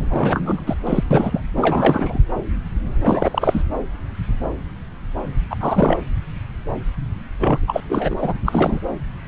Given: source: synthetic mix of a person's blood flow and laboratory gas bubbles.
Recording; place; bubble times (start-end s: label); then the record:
Doppler ultrasound of blood flow; subclavian vein
0.00-0.74 s: bubbles
0.85-1.04 s: bubbles
1.10-1.41 s: bubbles
1.57-2.19 s: bubbles
3.01-3.64 s: bubbles
5.50-5.57 s: bubbles
5.60-5.98 s: bubbles
7.39-7.59 s: bubbles
7.67-7.80 s: bubbles
7.88-8.15 s: bubbles
8.21-8.34 s: bubbles
8.45-8.79 s: bubbles
From the record:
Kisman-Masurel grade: 333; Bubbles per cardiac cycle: rolling drumbeat, 9 or more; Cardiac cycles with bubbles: 50 to 99%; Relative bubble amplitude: loud (0.450 to 0.775); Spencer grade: 3 (all of the cardiac periods contain showers or single bubble signals, but not dominating or overriding the cardiac motion signals); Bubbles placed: anywhere in the cardiac cycle